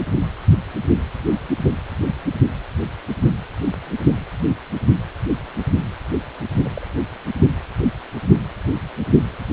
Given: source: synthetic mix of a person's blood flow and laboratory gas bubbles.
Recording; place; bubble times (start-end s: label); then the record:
Doppler ultrasound of blood flow; precordium
6.65-6.69 s: bubbles
6.74-6.87 s: bubbles
From the record:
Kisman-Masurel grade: 111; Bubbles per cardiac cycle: 1 to 2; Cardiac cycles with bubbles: 1 to 10%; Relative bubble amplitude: barely perceptible (0.100 to 0.250); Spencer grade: 1 (occasional bubble signal discernible with the cardiac motion signal, with majority of cardiac periods free of bubbles); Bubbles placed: only in the low amplitude regions of the cardiac cycle